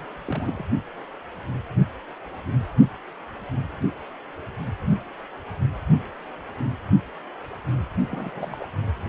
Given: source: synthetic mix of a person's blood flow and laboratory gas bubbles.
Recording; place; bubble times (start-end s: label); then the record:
Doppler ultrasound of blood flow; precordium
0.00-0.05 s: bubbles
0.25-0.63 s: bubbles
8.08-8.66 s: bubbles
From the record:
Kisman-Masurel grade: 221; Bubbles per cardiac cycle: several, 3 to 8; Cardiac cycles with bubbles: 10 to 50%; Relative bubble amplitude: barely perceptible (0.100 to 0.250); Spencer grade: 2 (many but less than half of the cardiac periods contain bubble signals, singularly or in groups); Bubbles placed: only in the low amplitude regions of the cardiac cycle